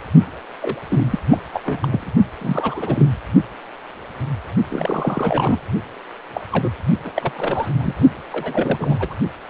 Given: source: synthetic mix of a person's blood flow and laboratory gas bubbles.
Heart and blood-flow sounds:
Doppler ultrasound of blood flow; precordium
0.61-0.75 s: bubbles
0.89-1.07 s: bubbles
1.10-1.19 s: bubbles
1.30-1.38 s: bubbles
1.53-1.62 s: bubbles
1.65-2.15 s: bubbles
2.39-3.09 s: bubbles
4.71-5.59 s: bubbles
6.34-6.41 s: bubbles
6.50-6.70 s: bubbles
6.90-6.96 s: bubbles
7.02-7.12 s: bubbles
7.15-7.32 s: bubbles
7.35-7.68 s: bubbles
7.79-7.94 s: bubbles
8.32-9.16 s: bubbles
From the record:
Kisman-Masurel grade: 332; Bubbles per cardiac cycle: rolling drumbeat, 9 or more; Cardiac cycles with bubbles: 50 to 99%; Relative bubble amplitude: moderate (0.250 to 0.450); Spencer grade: 3 (all of the cardiac periods contain showers or single bubble signals, but not dominating or overriding the cardiac motion signals); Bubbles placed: only in the low amplitude regions of the cardiac cycle

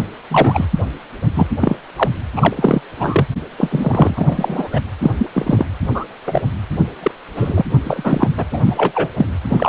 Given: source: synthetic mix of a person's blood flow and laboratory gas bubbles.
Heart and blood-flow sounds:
Doppler ultrasound of blood flow; precordium
0.29-0.65 s: bubbles
1.36-1.47 s: bubbles
1.60-1.76 s: bubbles
1.96-2.10 s: bubbles
2.36-2.54 s: bubbles
2.58-2.82 s: bubbles
3.00-3.27 s: bubbles
3.58-4.81 s: bubbles
5.02-5.11 s: bubbles
5.18-5.29 s: bubbles
5.33-5.67 s: bubbles
5.94-6.05 s: bubbles
6.26-6.42 s: bubbles
7.03-7.11 s: bubbles
7.37-7.62 s: bubbles
7.83-8.29 s: bubbles
8.37-8.45 s: bubbles
8.51-8.60 s: bubbles
8.62-9.08 s: bubbles
9.16-9.26 s: bubbles
9.49-9.69 s: bubbles
From the record:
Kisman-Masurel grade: 243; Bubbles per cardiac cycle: several, 3 to 8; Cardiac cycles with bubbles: 100%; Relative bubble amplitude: loud (0.450 to 0.775); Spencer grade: 3 (all of the cardiac periods contain showers or single bubble signals, but not dominating or overriding the cardiac motion signals); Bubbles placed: anywhere in the cardiac cycle

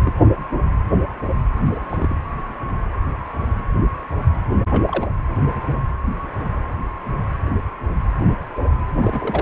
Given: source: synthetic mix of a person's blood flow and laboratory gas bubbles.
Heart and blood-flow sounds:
Doppler ultrasound of blood flow; precordium
0.00-0.12 s: bubbles
1.67-2.14 s: bubbles
4.70-5.06 s: bubbles
5.29-5.39 s: bubbles
9.02-9.42 s: bubbles
From the record:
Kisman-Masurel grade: 221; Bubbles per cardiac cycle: several, 3 to 8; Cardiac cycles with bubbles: 10 to 50%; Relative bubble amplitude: barely perceptible (0.100 to 0.250); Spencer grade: 2 (many but less than half of the cardiac periods contain bubble signals, singularly or in groups); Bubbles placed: anywhere in the cardiac cycle

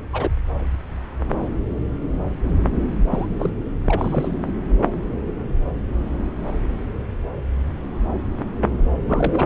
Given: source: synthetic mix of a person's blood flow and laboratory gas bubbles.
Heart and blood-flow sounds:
Doppler ultrasound of blood flow; subclavian vein
0.12-0.31 s: bubbles
3.10-3.26 s: bubbles
3.39-3.51 s: bubbles
3.85-4.46 s: bubbles
9.08-9.46 s: bubbles
From the record:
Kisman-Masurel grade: 222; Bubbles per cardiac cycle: several, 3 to 8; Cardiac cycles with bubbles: 10 to 50%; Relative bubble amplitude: moderate (0.250 to 0.450); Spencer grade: 2 (many but less than half of the cardiac periods contain bubble signals, singularly or in groups); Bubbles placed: anywhere in the cardiac cycle

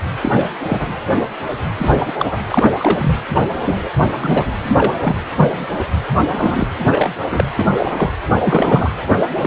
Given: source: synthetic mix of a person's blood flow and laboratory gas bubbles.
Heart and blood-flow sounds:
Doppler ultrasound of blood flow; precordium
0.21-0.47 s: bubbles
0.69-0.93 s: bubbles
1.77-1.92 s: bubbles
2.05-2.13 s: bubbles
2.18-2.41 s: bubbles
2.48-2.71 s: bubbles
2.78-3.17 s: bubbles
3.31-3.41 s: bubbles
3.65-3.89 s: bubbles
3.98-4.07 s: bubbles
4.14-4.52 s: bubbles
4.63-4.95 s: bubbles
5.00-5.16 s: bubbles
5.36-5.89 s: bubbles
6.25-6.67 s: bubbles
6.86-7.11 s: bubbles
7.30-7.44 s: bubbles
7.55-8.12 s: bubbles
8.43-8.91 s: bubbles
9.40-9.47 s: bubbles
From the record:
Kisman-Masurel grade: 232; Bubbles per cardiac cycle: several, 3 to 8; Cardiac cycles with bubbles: 50 to 99%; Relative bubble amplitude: moderate (0.250 to 0.450); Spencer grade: 3 (all of the cardiac periods contain showers or single bubble signals, but not dominating or overriding the cardiac motion signals); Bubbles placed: anywhere in the cardiac cycle

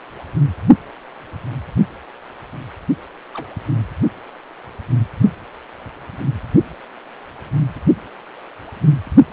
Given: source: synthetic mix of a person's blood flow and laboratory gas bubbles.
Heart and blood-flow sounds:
Doppler ultrasound of blood flow; precordium
3.34-3.46 s: bubbles
From the record:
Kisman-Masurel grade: 111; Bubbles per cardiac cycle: 1 to 2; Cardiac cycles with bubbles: 1 to 10%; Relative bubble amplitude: barely perceptible (0.100 to 0.250); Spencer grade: 1 (occasional bubble signal discernible with the cardiac motion signal, with majority of cardiac periods free of bubbles); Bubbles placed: only in the low amplitude regions of the cardiac cycle

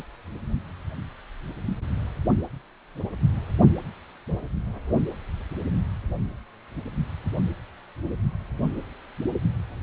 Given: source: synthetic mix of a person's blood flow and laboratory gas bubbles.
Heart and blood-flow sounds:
Doppler ultrasound of blood flow; precordium
0.00-0.04 s: bubbles
From the record:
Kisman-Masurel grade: 113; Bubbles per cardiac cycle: 1 to 2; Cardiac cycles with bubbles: 1 to 10%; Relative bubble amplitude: loud (0.450 to 0.775); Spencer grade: 1 (occasional bubble signal discernible with the cardiac motion signal, with majority of cardiac periods free of bubbles); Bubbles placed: only in the low amplitude regions of the cardiac cycle

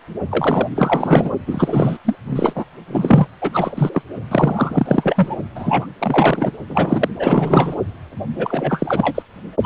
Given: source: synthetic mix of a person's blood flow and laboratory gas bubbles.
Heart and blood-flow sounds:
Doppler ultrasound of blood flow; precordium
0.31-0.67 s: bubbles
0.75-1.30 s: bubbles
1.47-1.97 s: bubbles
2.04-2.16 s: bubbles
2.25-2.64 s: bubbles
2.88-3.27 s: bubbles
3.41-4.02 s: bubbles
4.31-5.37 s: bubbles
5.55-5.87 s: bubbles
5.99-6.51 s: bubbles
6.69-7.09 s: bubbles
7.19-7.77 s: bubbles
8.35-9.22 s: bubbles
9.63-9.66 s: bubbles
From the record:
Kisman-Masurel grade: 444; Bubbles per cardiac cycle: continuous sound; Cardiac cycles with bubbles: 100%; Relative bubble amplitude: maximal (0.775 to 0.999); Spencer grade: 4 (maximum detectable bubble signal sounding continuously throughout systole and diastole of every cardiac period, and overriding the amplitude of the normal cardiac signals); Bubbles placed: only in the low amplitude regions of the cardiac cycle

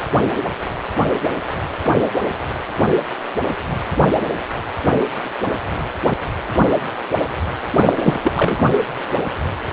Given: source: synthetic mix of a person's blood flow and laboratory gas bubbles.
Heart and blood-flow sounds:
Doppler ultrasound of blood flow; precordium
7.77-8.20 s: bubbles
8.23-8.32 s: bubbles
8.35-8.71 s: bubbles
From the record:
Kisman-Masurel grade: 213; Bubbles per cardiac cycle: several, 3 to 8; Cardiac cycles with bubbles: 1 to 10%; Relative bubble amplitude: loud (0.450 to 0.775); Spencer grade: 1 (occasional bubble signal discernible with the cardiac motion signal, with majority of cardiac periods free of bubbles); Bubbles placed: anywhere in the cardiac cycle

